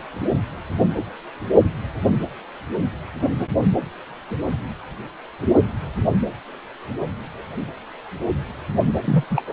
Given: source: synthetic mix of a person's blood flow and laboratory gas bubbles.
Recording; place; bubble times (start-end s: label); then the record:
Doppler ultrasound of blood flow; precordium
9.04-9.24 s: bubbles
9.30-9.44 s: bubbles
9.47-9.53 s: bubbles
From the record:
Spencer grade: 1 (occasional bubble signal discernible with the cardiac motion signal, with majority of cardiac periods free of bubbles); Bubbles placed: anywhere in the cardiac cycle